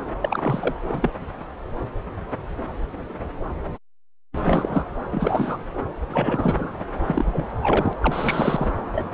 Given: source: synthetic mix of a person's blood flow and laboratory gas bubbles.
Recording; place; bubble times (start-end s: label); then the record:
Doppler ultrasound of blood flow; subclavian vein
0.21-0.74 s: bubbles
0.89-1.10 s: bubbles
4.43-4.84 s: bubbles
5.12-5.64 s: bubbles
6.09-6.75 s: bubbles
7.04-7.46 s: bubbles
7.62-7.93 s: bubbles
8.03-8.67 s: bubbles
8.95-9.04 s: bubbles
From the record:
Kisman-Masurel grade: 332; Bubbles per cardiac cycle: rolling drumbeat, 9 or more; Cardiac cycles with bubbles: 50 to 99%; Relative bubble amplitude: moderate (0.250 to 0.450); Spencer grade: 3 (all of the cardiac periods contain showers or single bubble signals, but not dominating or overriding the cardiac motion signals); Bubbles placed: anywhere in the cardiac cycle